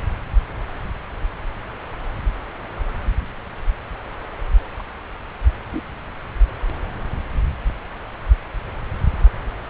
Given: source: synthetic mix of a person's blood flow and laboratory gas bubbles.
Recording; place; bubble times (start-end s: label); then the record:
Doppler ultrasound of blood flow; subclavian vein
4.79-4.82 s: bubbles
5.71-5.82 s: bubbles
From the record:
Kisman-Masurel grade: 111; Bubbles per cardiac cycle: 1 to 2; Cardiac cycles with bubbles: 1 to 10%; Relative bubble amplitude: barely perceptible (0.100 to 0.250); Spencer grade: 1 (occasional bubble signal discernible with the cardiac motion signal, with majority of cardiac periods free of bubbles); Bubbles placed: anywhere in the cardiac cycle